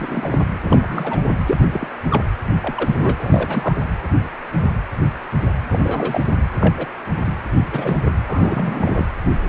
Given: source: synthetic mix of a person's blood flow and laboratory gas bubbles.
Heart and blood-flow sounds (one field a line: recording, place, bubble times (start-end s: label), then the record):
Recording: Doppler ultrasound of blood flow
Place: precordium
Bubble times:
0.00-0.40 s: bubbles
0.62-1.33 s: bubbles
1.45-1.57 s: bubbles
1.73-1.87 s: bubbles
2.10-2.24 s: bubbles
2.61-3.81 s: bubbles
5.71-6.25 s: bubbles
6.37-6.42 s: bubbles
6.60-6.75 s: bubbles
6.77-6.86 s: bubbles
7.25-7.38 s: bubbles
7.71-7.97 s: bubbles
8.05-8.11 s: bubbles
8.27-9.04 s: bubbles
From the record:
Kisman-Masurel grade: 232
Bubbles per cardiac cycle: several, 3 to 8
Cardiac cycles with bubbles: 50 to 99%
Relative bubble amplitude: moderate (0.250 to 0.450)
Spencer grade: 3 (all of the cardiac periods contain showers or single bubble signals, but not dominating or overriding the cardiac motion signals)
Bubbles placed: anywhere in the cardiac cycle